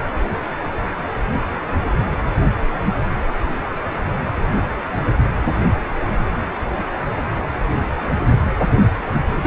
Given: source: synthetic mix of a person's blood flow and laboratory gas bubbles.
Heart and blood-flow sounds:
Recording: Doppler ultrasound of blood flow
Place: precordium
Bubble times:
9.35-9.47 s: bubbles
From the record:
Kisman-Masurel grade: 212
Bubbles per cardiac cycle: several, 3 to 8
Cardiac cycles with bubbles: 1 to 10%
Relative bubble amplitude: moderate (0.250 to 0.450)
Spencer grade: 1 (occasional bubble signal discernible with the cardiac motion signal, with majority of cardiac periods free of bubbles)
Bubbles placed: anywhere in the cardiac cycle

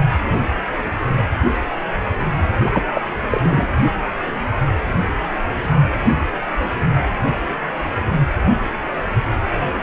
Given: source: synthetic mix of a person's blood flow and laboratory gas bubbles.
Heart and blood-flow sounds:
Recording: Doppler ultrasound of blood flow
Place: precordium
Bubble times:
2.62-2.82 s: bubbles
2.92-3.01 s: bubbles
3.29-3.68 s: bubbles
From the record:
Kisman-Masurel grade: 212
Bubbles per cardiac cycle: several, 3 to 8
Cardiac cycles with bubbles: 1 to 10%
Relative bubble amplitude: moderate (0.250 to 0.450)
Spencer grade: 1 (occasional bubble signal discernible with the cardiac motion signal, with majority of cardiac periods free of bubbles)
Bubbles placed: anywhere in the cardiac cycle

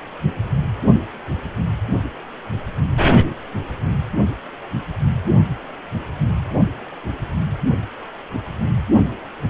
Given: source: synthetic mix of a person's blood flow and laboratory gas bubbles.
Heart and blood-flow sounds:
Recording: Doppler ultrasound of blood flow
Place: precordium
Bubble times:
no bubbles
From the record:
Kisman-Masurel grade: 000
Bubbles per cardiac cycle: 0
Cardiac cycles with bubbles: 0%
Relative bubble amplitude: no bubbles discernible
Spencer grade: 0 (complete lack of bubble signals)

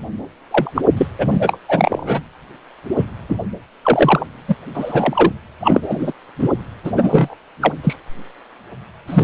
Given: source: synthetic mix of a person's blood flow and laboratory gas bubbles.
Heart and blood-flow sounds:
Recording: Doppler ultrasound of blood flow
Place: precordium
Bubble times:
0.51-0.71 s: bubbles
0.75-0.82 s: bubbles
0.97-1.08 s: bubbles
1.18-1.58 s: bubbles
1.68-2.24 s: bubbles
2.97-3.04 s: bubbles
3.29-3.38 s: bubbles
3.83-4.25 s: bubbles
4.47-4.55 s: bubbles
4.74-5.32 s: bubbles
5.60-6.12 s: bubbles
6.39-6.48 s: bubbles
6.84-6.92 s: bubbles
6.96-7.35 s: bubbles
7.61-7.72 s: bubbles
7.83-7.96 s: bubbles
9.07-9.24 s: bubbles
From the record:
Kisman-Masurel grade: 233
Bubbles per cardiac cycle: several, 3 to 8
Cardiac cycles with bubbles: 50 to 99%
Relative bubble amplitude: loud (0.450 to 0.775)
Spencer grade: 3 (all of the cardiac periods contain showers or single bubble signals, but not dominating or overriding the cardiac motion signals)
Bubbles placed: anywhere in the cardiac cycle

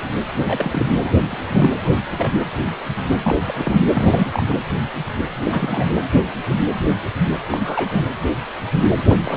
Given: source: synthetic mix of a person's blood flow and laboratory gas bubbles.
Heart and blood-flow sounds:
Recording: Doppler ultrasound of blood flow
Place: precordium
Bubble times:
0.37-0.87 s: bubbles
1.03-1.16 s: bubbles
1.27-1.70 s: bubbles
1.85-1.90 s: bubbles
2.17-2.31 s: bubbles
3.23-3.36 s: bubbles
3.45-3.82 s: bubbles
3.94-4.55 s: bubbles
5.42-5.92 s: bubbles
7.51-8.08 s: bubbles
8.98-9.03 s: bubbles
9.09-9.37 s: bubbles
From the record:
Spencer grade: 3 (all of the cardiac periods contain showers or single bubble signals, but not dominating or overriding the cardiac motion signals)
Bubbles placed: anywhere in the cardiac cycle

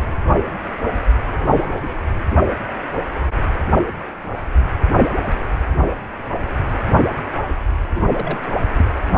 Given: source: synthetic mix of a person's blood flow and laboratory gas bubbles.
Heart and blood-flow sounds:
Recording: Doppler ultrasound of blood flow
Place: precordium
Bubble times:
7.94-8.01 s: bubbles
8.12-8.38 s: bubbles
8.77-8.85 s: bubbles
From the record:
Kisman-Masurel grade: 211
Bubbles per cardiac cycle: several, 3 to 8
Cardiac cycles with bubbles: 1 to 10%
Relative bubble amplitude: barely perceptible (0.100 to 0.250)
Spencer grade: 1 (occasional bubble signal discernible with the cardiac motion signal, with majority of cardiac periods free of bubbles)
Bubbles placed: anywhere in the cardiac cycle

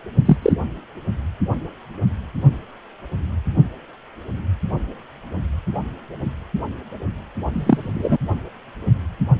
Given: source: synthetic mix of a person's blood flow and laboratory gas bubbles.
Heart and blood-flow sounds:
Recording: Doppler ultrasound of blood flow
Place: precordium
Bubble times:
0.25-0.37 s: bubbles
0.42-0.52 s: bubbles
7.53-8.17 s: bubbles
From the record:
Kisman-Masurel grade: 123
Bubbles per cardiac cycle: 1 to 2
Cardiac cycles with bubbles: 10 to 50%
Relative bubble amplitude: loud (0.450 to 0.775)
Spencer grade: 2 (many but less than half of the cardiac periods contain bubble signals, singularly or in groups)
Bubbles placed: only in the low amplitude regions of the cardiac cycle

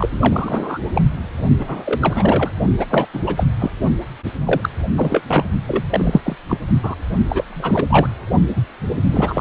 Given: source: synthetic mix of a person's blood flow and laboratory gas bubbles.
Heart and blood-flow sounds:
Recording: Doppler ultrasound of blood flow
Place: precordium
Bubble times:
0.00-0.78 s: bubbles
0.94-1.02 s: bubbles
1.58-2.51 s: bubbles
2.79-2.85 s: bubbles
2.90-3.06 s: bubbles
3.14-3.20 s: bubbles
3.27-3.45 s: bubbles
3.59-3.70 s: bubbles
4.45-4.69 s: bubbles
4.95-5.22 s: bubbles
5.28-5.48 s: bubbles
5.67-5.84 s: bubbles
5.90-6.21 s: bubbles
6.24-6.36 s: bubbles
6.48-6.57 s: bubbles
6.83-6.95 s: bubbles
7.25-7.44 s: bubbles
7.47-7.87 s: bubbles
7.90-8.08 s: bubbles
8.55-8.63 s: bubbles
9.12-9.41 s: bubbles
From the record:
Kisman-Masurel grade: 343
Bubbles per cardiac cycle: rolling drumbeat, 9 or more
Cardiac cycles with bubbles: 100%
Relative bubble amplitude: loud (0.450 to 0.775)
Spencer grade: 3 (all of the cardiac periods contain showers or single bubble signals, but not dominating or overriding the cardiac motion signals)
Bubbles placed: only in the low amplitude regions of the cardiac cycle

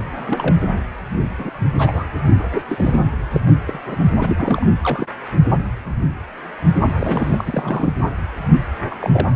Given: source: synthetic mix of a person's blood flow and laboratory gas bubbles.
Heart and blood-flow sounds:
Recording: Doppler ultrasound of blood flow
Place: precordium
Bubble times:
0.17-0.56 s: bubbles
1.38-1.51 s: bubbles
1.78-2.04 s: bubbles
2.52-2.62 s: bubbles
2.67-3.00 s: bubbles
3.30-3.41 s: bubbles
3.66-3.79 s: bubbles
3.86-4.04 s: bubbles
4.21-4.70 s: bubbles
4.82-5.07 s: bubbles
6.99-7.94 s: bubbles
8.90-8.95 s: bubbles
9.01-9.27 s: bubbles
From the record:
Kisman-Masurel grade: 232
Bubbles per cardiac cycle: several, 3 to 8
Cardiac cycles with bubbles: 50 to 99%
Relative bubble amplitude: moderate (0.250 to 0.450)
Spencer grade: 3 (all of the cardiac periods contain showers or single bubble signals, but not dominating or overriding the cardiac motion signals)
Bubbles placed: anywhere in the cardiac cycle

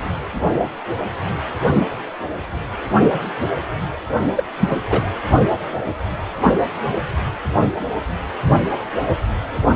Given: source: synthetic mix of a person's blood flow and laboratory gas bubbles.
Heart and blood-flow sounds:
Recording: Doppler ultrasound of blood flow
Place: precordium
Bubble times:
4.37-4.44 s: bubbles
4.59-4.76 s: bubbles
4.89-5.07 s: bubbles
From the record:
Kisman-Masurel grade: 213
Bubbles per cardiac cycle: several, 3 to 8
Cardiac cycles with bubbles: 1 to 10%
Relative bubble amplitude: loud (0.450 to 0.775)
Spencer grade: 1 (occasional bubble signal discernible with the cardiac motion signal, with majority of cardiac periods free of bubbles)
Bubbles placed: only in the low amplitude regions of the cardiac cycle

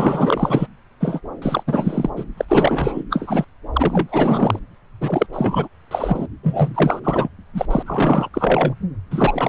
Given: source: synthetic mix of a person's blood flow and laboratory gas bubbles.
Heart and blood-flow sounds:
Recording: Doppler ultrasound of blood flow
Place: subclavian vein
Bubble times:
0.00-0.67 s: bubbles
1.00-1.21 s: bubbles
1.42-1.64 s: bubbles
1.67-2.10 s: bubbles
2.16-2.25 s: bubbles
2.37-2.45 s: bubbles
2.48-3.04 s: bubbles
3.10-3.44 s: bubbles
3.73-4.60 s: bubbles
5.01-5.26 s: bubbles
5.33-5.68 s: bubbles
5.91-6.26 s: bubbles
6.43-7.01 s: bubbles
7.04-7.29 s: bubbles
7.55-7.66 s: bubbles
7.70-7.83 s: bubbles
7.86-8.29 s: bubbles
8.33-8.75 s: bubbles
9.11-9.49 s: bubbles
From the record:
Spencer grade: 4 (maximum detectable bubble signal sounding continuously throughout systole and diastole of every cardiac period, and overriding the amplitude of the normal cardiac signals)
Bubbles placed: anywhere in the cardiac cycle

